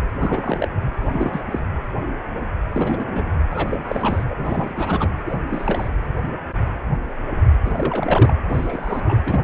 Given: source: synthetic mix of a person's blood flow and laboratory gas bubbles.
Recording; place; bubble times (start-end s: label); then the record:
Doppler ultrasound of blood flow; precordium
0.19-0.69 s: bubbles
0.95-1.41 s: bubbles
1.51-1.59 s: bubbles
2.73-3.29 s: bubbles
3.50-4.23 s: bubbles
4.29-5.10 s: bubbles
5.26-5.37 s: bubbles
5.49-5.89 s: bubbles
7.65-8.36 s: bubbles
8.49-9.16 s: bubbles
9.24-9.43 s: bubbles
From the record:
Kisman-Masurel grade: 232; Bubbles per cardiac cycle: several, 3 to 8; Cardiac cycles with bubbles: 50 to 99%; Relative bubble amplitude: moderate (0.250 to 0.450); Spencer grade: 3 (all of the cardiac periods contain showers or single bubble signals, but not dominating or overriding the cardiac motion signals); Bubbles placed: anywhere in the cardiac cycle